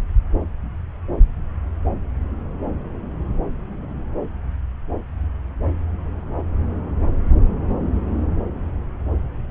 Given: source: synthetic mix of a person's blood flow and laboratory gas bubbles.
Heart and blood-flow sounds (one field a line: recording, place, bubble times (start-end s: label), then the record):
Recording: Doppler ultrasound of blood flow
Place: subclavian vein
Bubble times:
no bubbles
From the record:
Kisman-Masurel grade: 000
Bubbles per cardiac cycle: 0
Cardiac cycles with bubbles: 0%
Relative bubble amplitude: no bubbles discernible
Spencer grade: 0 (complete lack of bubble signals)